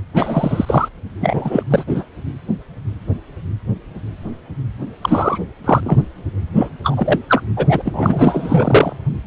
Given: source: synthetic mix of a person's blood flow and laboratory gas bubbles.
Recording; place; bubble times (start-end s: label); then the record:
Doppler ultrasound of blood flow; precordium
0.14-0.89 s: bubbles
1.20-1.62 s: bubbles
1.70-1.84 s: bubbles
1.87-2.04 s: bubbles
5.01-5.38 s: bubbles
5.64-6.04 s: bubbles
6.55-6.69 s: bubbles
6.83-7.20 s: bubbles
7.28-7.42 s: bubbles
7.57-7.82 s: bubbles
7.85-8.93 s: bubbles
From the record:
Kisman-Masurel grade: 333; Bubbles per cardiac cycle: rolling drumbeat, 9 or more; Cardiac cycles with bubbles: 50 to 99%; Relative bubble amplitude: loud (0.450 to 0.775); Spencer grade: 3 (all of the cardiac periods contain showers or single bubble signals, but not dominating or overriding the cardiac motion signals); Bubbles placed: anywhere in the cardiac cycle